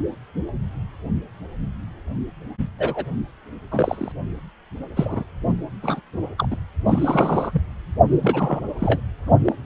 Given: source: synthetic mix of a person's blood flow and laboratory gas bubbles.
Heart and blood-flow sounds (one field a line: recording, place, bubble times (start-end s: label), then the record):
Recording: Doppler ultrasound of blood flow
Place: precordium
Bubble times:
2.79-3.04 s: bubbles
3.71-4.12 s: bubbles
4.96-5.23 s: bubbles
5.82-6.00 s: bubbles
6.38-6.56 s: bubbles
6.85-7.62 s: bubbles
8.07-8.61 s: bubbles
8.79-9.01 s: bubbles
9.45-9.56 s: bubbles
From the record:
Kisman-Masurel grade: 232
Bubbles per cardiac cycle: several, 3 to 8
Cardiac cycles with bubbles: 50 to 99%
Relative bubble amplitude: moderate (0.250 to 0.450)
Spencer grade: 3 (all of the cardiac periods contain showers or single bubble signals, but not dominating or overriding the cardiac motion signals)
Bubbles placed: only in the low amplitude regions of the cardiac cycle